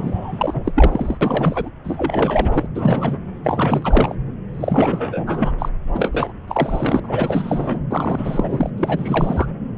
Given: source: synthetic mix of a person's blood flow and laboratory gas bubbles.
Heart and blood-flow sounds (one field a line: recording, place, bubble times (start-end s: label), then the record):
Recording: Doppler ultrasound of blood flow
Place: subclavian vein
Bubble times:
0.00-0.72 s: bubbles
0.76-1.17 s: bubbles
1.21-1.69 s: bubbles
1.84-2.67 s: bubbles
2.75-3.18 s: bubbles
3.44-4.15 s: bubbles
4.54-5.51 s: bubbles
5.58-5.69 s: bubbles
5.94-6.09 s: bubbles
6.12-6.32 s: bubbles
6.47-7.00 s: bubbles
7.03-7.83 s: bubbles
7.91-8.70 s: bubbles
8.78-9.46 s: bubbles
From the record:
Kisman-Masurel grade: 342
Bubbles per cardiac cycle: rolling drumbeat, 9 or more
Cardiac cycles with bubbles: 100%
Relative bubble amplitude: moderate (0.250 to 0.450)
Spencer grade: 3 (all of the cardiac periods contain showers or single bubble signals, but not dominating or overriding the cardiac motion signals)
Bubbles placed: anywhere in the cardiac cycle